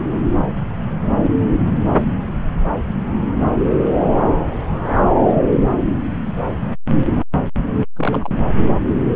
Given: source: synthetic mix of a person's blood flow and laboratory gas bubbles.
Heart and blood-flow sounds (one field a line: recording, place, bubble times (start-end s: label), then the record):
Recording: Doppler ultrasound of blood flow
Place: subclavian vein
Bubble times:
7.96-8.30 s: bubbles
From the record:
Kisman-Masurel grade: 112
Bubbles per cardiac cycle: 1 to 2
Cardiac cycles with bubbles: 1 to 10%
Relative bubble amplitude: moderate (0.250 to 0.450)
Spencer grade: 1 (occasional bubble signal discernible with the cardiac motion signal, with majority of cardiac periods free of bubbles)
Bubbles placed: anywhere in the cardiac cycle